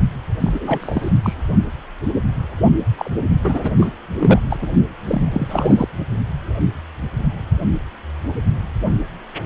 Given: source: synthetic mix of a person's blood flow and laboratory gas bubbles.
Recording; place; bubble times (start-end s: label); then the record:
Doppler ultrasound of blood flow; precordium
0.40-1.10 s: bubbles
1.22-1.34 s: bubbles
2.98-3.10 s: bubbles
3.44-3.73 s: bubbles
3.76-3.89 s: bubbles
4.17-4.42 s: bubbles
4.50-4.56 s: bubbles
4.61-4.67 s: bubbles
5.07-5.22 s: bubbles
5.25-5.88 s: bubbles
From the record:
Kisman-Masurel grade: 332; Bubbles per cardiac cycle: rolling drumbeat, 9 or more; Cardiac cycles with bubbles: 50 to 99%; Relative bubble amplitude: moderate (0.250 to 0.450); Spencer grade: 3 (all of the cardiac periods contain showers or single bubble signals, but not dominating or overriding the cardiac motion signals); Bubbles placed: only in the low amplitude regions of the cardiac cycle